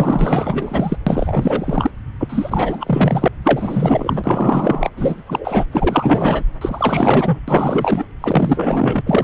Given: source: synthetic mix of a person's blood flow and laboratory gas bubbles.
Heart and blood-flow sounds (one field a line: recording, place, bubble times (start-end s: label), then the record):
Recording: Doppler ultrasound of blood flow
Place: subclavian vein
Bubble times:
0.00-0.96 s: bubbles
1.06-1.90 s: bubbles
2.19-3.28 s: bubbles
3.44-4.89 s: bubbles
4.96-5.23 s: bubbles
5.26-5.66 s: bubbles
5.71-6.42 s: bubbles
6.61-7.39 s: bubbles
7.47-8.05 s: bubbles
8.21-9.02 s: bubbles
9.06-9.24 s: bubbles
From the record:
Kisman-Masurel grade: 444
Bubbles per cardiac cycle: continuous sound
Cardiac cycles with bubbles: 100%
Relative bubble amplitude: maximal (0.775 to 0.999)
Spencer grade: 4 (maximum detectable bubble signal sounding continuously throughout systole and diastole of every cardiac period, and overriding the amplitude of the normal cardiac signals)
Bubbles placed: anywhere in the cardiac cycle